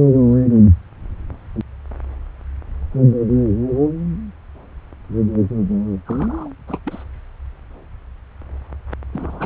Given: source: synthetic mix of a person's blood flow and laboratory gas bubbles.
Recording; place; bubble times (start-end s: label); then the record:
Doppler ultrasound of blood flow; subclavian vein
6.05-6.50 s: bubbles
6.67-6.79 s: bubbles
6.85-7.04 s: bubbles
9.12-9.46 s: bubbles
From the record:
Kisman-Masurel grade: 221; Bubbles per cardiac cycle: several, 3 to 8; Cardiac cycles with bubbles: 10 to 50%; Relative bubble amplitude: barely perceptible (0.100 to 0.250); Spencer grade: 2 (many but less than half of the cardiac periods contain bubble signals, singularly or in groups); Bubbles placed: anywhere in the cardiac cycle